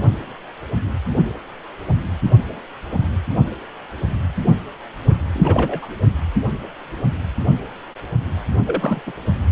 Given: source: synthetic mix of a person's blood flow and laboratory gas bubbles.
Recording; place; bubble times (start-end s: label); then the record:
Doppler ultrasound of blood flow; precordium
5.05-5.16 s: bubbles
5.34-5.87 s: bubbles
8.67-9.02 s: bubbles
9.06-9.12 s: bubbles
From the record:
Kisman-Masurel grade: 222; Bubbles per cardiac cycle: several, 3 to 8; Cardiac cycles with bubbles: 10 to 50%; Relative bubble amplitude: moderate (0.250 to 0.450); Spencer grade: 2 (many but less than half of the cardiac periods contain bubble signals, singularly or in groups); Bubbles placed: only in the low amplitude regions of the cardiac cycle